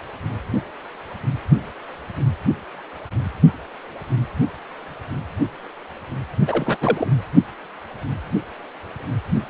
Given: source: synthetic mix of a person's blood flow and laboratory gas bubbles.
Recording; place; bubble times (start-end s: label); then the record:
Doppler ultrasound of blood flow; precordium
6.47-6.77 s: bubbles
6.80-7.07 s: bubbles
From the record:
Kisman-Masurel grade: 212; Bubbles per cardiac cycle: several, 3 to 8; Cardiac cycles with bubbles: 1 to 10%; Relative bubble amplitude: moderate (0.250 to 0.450); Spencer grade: 1 (occasional bubble signal discernible with the cardiac motion signal, with majority of cardiac periods free of bubbles); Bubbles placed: only in the low amplitude regions of the cardiac cycle